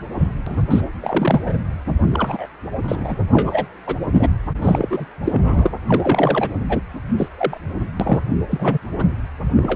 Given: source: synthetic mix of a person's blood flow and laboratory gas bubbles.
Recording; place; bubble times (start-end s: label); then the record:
Doppler ultrasound of blood flow; precordium
0.18-0.29 s: bubbles
0.46-0.67 s: bubbles
0.70-0.81 s: bubbles
1.00-1.59 s: bubbles
2.12-2.47 s: bubbles
2.82-3.17 s: bubbles
3.33-3.67 s: bubbles
3.86-3.97 s: bubbles
4.12-4.28 s: bubbles
4.61-5.05 s: bubbles
5.24-5.71 s: bubbles
5.87-6.56 s: bubbles
6.69-6.78 s: bubbles
7.17-7.28 s: bubbles
7.38-7.57 s: bubbles
8.00-8.21 s: bubbles
8.50-8.78 s: bubbles
8.98-9.09 s: bubbles
9.55-9.75 s: bubbles
From the record:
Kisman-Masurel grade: 243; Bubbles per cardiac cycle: several, 3 to 8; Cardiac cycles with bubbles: 100%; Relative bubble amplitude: loud (0.450 to 0.775); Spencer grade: 3 (all of the cardiac periods contain showers or single bubble signals, but not dominating or overriding the cardiac motion signals); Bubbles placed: anywhere in the cardiac cycle